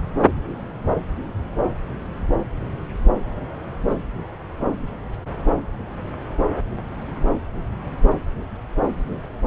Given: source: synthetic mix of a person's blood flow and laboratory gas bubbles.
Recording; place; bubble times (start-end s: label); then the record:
Doppler ultrasound of blood flow; subclavian vein
no bubbles
From the record:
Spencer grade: 0 (complete lack of bubble signals)